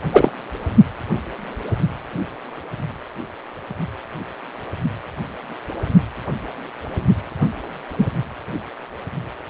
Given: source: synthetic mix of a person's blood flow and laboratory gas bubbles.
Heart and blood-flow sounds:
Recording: Doppler ultrasound of blood flow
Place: precordium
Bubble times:
0.12-0.31 s: bubbles
7.41-7.48 s: bubbles
7.99-8.05 s: bubbles
From the record:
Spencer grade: 2 (many but less than half of the cardiac periods contain bubble signals, singularly or in groups)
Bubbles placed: only in the low amplitude regions of the cardiac cycle

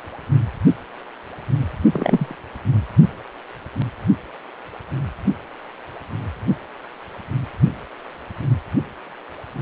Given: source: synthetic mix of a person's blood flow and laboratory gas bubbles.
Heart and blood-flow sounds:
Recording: Doppler ultrasound of blood flow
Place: precordium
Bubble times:
1.93-2.36 s: bubbles
From the record:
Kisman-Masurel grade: 222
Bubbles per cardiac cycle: several, 3 to 8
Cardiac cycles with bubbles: 10 to 50%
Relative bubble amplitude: moderate (0.250 to 0.450)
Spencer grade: 2 (many but less than half of the cardiac periods contain bubble signals, singularly or in groups)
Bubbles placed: only in the low amplitude regions of the cardiac cycle

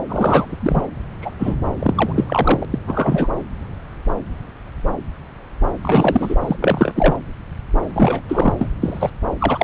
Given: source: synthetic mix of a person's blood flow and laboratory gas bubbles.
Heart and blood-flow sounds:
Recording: Doppler ultrasound of blood flow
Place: subclavian vein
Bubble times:
0.08-0.86 s: bubbles
1.21-1.31 s: bubbles
1.39-1.54 s: bubbles
1.79-2.12 s: bubbles
2.15-2.24 s: bubbles
2.27-2.65 s: bubbles
2.70-2.79 s: bubbles
2.87-3.27 s: bubbles
5.83-6.36 s: bubbles
6.40-6.56 s: bubbles
6.62-7.16 s: bubbles
7.94-8.21 s: bubbles
8.29-8.54 s: bubbles
8.59-8.70 s: bubbles
8.82-9.10 s: bubbles
9.38-9.64 s: bubbles
From the record:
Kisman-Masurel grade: 233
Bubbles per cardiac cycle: several, 3 to 8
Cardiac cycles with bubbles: 50 to 99%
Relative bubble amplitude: loud (0.450 to 0.775)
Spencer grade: 3 (all of the cardiac periods contain showers or single bubble signals, but not dominating or overriding the cardiac motion signals)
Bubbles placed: anywhere in the cardiac cycle

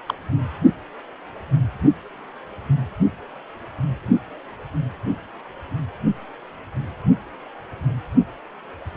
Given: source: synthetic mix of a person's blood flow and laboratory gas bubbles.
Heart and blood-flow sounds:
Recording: Doppler ultrasound of blood flow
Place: precordium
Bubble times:
0.06-0.14 s: bubbles
From the record:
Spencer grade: 2 (many but less than half of the cardiac periods contain bubble signals, singularly or in groups)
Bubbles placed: anywhere in the cardiac cycle

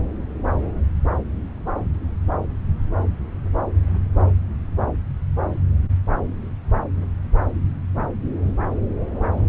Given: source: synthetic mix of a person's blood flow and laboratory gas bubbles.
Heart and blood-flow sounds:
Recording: Doppler ultrasound of blood flow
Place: subclavian vein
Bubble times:
no bubbles
From the record:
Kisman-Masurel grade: 000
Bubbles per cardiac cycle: 0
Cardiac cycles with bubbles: 0%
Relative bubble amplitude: no bubbles discernible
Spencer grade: 0 (complete lack of bubble signals)

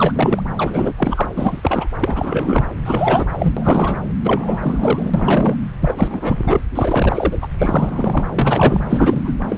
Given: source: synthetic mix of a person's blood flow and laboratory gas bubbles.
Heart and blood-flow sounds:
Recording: Doppler ultrasound of blood flow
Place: subclavian vein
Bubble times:
0.00-0.12 s: bubbles
0.15-0.43 s: bubbles
0.57-0.93 s: bubbles
0.96-1.26 s: bubbles
1.36-1.87 s: bubbles
2.00-2.69 s: bubbles
2.85-3.27 s: bubbles
3.31-4.01 s: bubbles
4.24-5.54 s: bubbles
5.81-6.61 s: bubbles
6.74-7.38 s: bubbles
7.42-7.48 s: bubbles
7.58-8.24 s: bubbles
8.30-8.80 s: bubbles
8.89-9.33 s: bubbles
9.47-9.58 s: bubbles
From the record:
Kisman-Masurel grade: 343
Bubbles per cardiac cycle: rolling drumbeat, 9 or more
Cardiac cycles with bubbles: 100%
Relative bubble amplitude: loud (0.450 to 0.775)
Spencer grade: 3 (all of the cardiac periods contain showers or single bubble signals, but not dominating or overriding the cardiac motion signals)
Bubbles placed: anywhere in the cardiac cycle

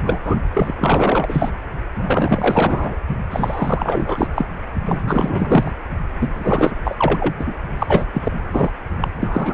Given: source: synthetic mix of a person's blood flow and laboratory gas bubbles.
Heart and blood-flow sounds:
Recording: Doppler ultrasound of blood flow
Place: precordium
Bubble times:
0.00-0.43 s: bubbles
0.53-0.73 s: bubbles
0.78-1.51 s: bubbles
1.97-2.97 s: bubbles
3.30-4.46 s: bubbles
4.84-5.71 s: bubbles
6.20-7.34 s: bubbles
7.38-7.56 s: bubbles
7.79-8.07 s: bubbles
8.13-8.31 s: bubbles
8.52-8.71 s: bubbles
9.00-9.08 s: bubbles
9.17-9.54 s: bubbles
From the record:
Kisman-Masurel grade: 444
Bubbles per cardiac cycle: continuous sound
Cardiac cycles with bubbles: 100%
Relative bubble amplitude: maximal (0.775 to 0.999)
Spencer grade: 4 (maximum detectable bubble signal sounding continuously throughout systole and diastole of every cardiac period, and overriding the amplitude of the normal cardiac signals)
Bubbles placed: only in the low amplitude regions of the cardiac cycle

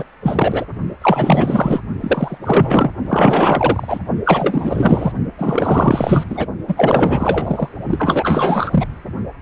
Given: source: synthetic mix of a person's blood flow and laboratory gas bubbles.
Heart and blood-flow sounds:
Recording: Doppler ultrasound of blood flow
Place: precordium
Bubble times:
0.00-0.04 s: bubbles
0.22-0.66 s: bubbles
1.02-1.80 s: bubbles
2.00-2.38 s: bubbles
2.42-2.90 s: bubbles
3.05-4.00 s: bubbles
4.25-5.12 s: bubbles
5.38-6.24 s: bubbles
6.29-6.47 s: bubbles
6.67-7.69 s: bubbles
7.90-8.87 s: bubbles
From the record:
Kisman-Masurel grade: 444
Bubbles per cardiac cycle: continuous sound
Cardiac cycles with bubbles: 100%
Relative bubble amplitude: maximal (0.775 to 0.999)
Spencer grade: 4 (maximum detectable bubble signal sounding continuously throughout systole and diastole of every cardiac period, and overriding the amplitude of the normal cardiac signals)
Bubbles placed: only in the low amplitude regions of the cardiac cycle

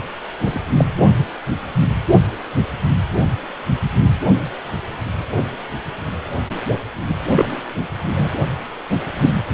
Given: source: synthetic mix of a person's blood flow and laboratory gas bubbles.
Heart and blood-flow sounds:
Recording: Doppler ultrasound of blood flow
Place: precordium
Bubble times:
0.42-0.59 s: bubbles
0.77-0.84 s: bubbles
7.08-7.15 s: bubbles
7.35-7.49 s: bubbles
8.15-8.34 s: bubbles
9.21-9.30 s: bubbles
From the record:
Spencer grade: 2 (many but less than half of the cardiac periods contain bubble signals, singularly or in groups)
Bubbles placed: only in the low amplitude regions of the cardiac cycle

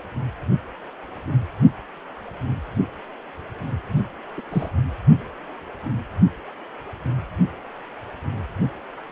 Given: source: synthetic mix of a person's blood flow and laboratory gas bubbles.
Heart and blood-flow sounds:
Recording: Doppler ultrasound of blood flow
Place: precordium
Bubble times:
4.37-4.41 s: bubbles
4.52-4.70 s: bubbles
From the record:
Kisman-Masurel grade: 222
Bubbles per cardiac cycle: several, 3 to 8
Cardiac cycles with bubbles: 10 to 50%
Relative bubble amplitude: moderate (0.250 to 0.450)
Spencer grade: 2 (many but less than half of the cardiac periods contain bubble signals, singularly or in groups)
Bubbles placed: only in the low amplitude regions of the cardiac cycle

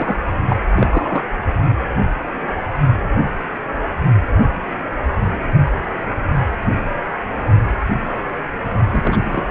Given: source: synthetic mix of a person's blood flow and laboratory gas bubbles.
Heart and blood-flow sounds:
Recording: Doppler ultrasound of blood flow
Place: precordium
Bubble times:
0.00-0.20 s: bubbles
0.48-0.57 s: bubbles
0.76-1.24 s: bubbles
8.92-9.43 s: bubbles
From the record:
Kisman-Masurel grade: 222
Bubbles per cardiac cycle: several, 3 to 8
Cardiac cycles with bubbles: 10 to 50%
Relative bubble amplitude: moderate (0.250 to 0.450)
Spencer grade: 2 (many but less than half of the cardiac periods contain bubble signals, singularly or in groups)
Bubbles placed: only in the low amplitude regions of the cardiac cycle

